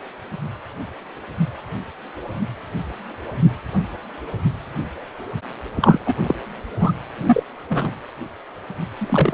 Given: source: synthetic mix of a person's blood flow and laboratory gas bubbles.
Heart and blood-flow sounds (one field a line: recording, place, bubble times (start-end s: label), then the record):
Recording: Doppler ultrasound of blood flow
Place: precordium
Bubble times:
5.75-6.18 s: bubbles
6.23-6.35 s: bubbles
6.79-6.92 s: bubbles
7.25-7.43 s: bubbles
7.69-7.93 s: bubbles
8.97-9.34 s: bubbles
From the record:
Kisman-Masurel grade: 223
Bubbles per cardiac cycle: several, 3 to 8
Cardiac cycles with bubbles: 10 to 50%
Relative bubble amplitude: loud (0.450 to 0.775)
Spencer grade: 2 (many but less than half of the cardiac periods contain bubble signals, singularly or in groups)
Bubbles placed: anywhere in the cardiac cycle